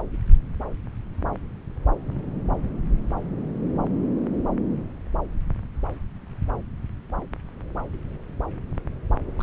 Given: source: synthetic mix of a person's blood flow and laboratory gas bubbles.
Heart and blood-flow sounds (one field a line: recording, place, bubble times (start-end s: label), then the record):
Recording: Doppler ultrasound of blood flow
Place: subclavian vein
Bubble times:
9.37-9.43 s: bubbles
From the record:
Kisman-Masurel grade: 211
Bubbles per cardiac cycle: several, 3 to 8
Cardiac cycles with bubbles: 1 to 10%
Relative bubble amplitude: barely perceptible (0.100 to 0.250)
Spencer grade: 1 (occasional bubble signal discernible with the cardiac motion signal, with majority of cardiac periods free of bubbles)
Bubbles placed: anywhere in the cardiac cycle